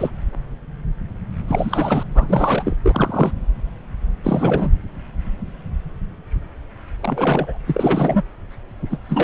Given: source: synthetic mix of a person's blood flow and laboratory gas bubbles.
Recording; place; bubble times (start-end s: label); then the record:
Doppler ultrasound of blood flow; subclavian vein
0.00-0.10 s: bubbles
1.48-2.03 s: bubbles
2.15-2.76 s: bubbles
2.83-3.31 s: bubbles
4.24-4.73 s: bubbles
7.00-7.58 s: bubbles
7.66-8.22 s: bubbles
8.89-8.98 s: bubbles
9.08-9.24 s: bubbles
From the record:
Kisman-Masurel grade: 333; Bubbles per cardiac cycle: rolling drumbeat, 9 or more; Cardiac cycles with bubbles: 50 to 99%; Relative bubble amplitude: loud (0.450 to 0.775); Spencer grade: 3 (all of the cardiac periods contain showers or single bubble signals, but not dominating or overriding the cardiac motion signals); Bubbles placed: anywhere in the cardiac cycle